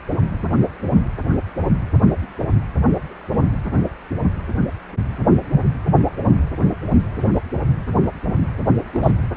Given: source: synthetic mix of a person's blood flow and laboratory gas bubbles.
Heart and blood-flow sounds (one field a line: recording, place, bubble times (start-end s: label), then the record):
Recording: Doppler ultrasound of blood flow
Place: precordium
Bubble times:
8.93-9.12 s: bubbles
From the record:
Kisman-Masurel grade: 112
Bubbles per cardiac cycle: 1 to 2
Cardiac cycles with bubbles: 1 to 10%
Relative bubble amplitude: moderate (0.250 to 0.450)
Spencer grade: 1 (occasional bubble signal discernible with the cardiac motion signal, with majority of cardiac periods free of bubbles)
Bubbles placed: anywhere in the cardiac cycle